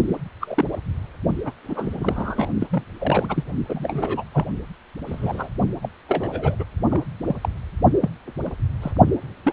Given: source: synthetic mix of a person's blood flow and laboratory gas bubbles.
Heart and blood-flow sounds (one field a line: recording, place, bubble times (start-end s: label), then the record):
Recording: Doppler ultrasound of blood flow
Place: precordium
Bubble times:
0.08-0.18 s: bubbles
0.41-0.65 s: bubbles
0.72-0.77 s: bubbles
1.45-1.52 s: bubbles
1.64-2.49 s: bubbles
2.60-2.67 s: bubbles
2.69-2.83 s: bubbles
2.98-3.43 s: bubbles
3.68-4.24 s: bubbles
4.33-4.45 s: bubbles
5.06-5.48 s: bubbles
5.83-5.89 s: bubbles
6.08-6.55 s: bubbles
6.59-6.64 s: bubbles
6.89-7.04 s: bubbles
7.26-7.49 s: bubbles
8.01-8.10 s: bubbles
8.45-8.51 s: bubbles
8.82-8.92 s: bubbles
9.43-9.53 s: bubbles
From the record:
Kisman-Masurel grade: 232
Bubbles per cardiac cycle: several, 3 to 8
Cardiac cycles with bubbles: 50 to 99%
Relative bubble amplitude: moderate (0.250 to 0.450)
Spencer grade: 3 (all of the cardiac periods contain showers or single bubble signals, but not dominating or overriding the cardiac motion signals)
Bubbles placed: only in the low amplitude regions of the cardiac cycle